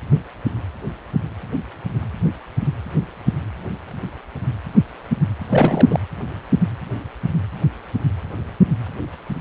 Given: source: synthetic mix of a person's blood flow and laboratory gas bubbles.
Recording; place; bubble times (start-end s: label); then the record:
Doppler ultrasound of blood flow; precordium
5.50-6.00 s: bubbles
From the record:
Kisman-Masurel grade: 212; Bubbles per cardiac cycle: several, 3 to 8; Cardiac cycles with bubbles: 1 to 10%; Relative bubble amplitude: moderate (0.250 to 0.450); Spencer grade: 1 (occasional bubble signal discernible with the cardiac motion signal, with majority of cardiac periods free of bubbles); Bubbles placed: anywhere in the cardiac cycle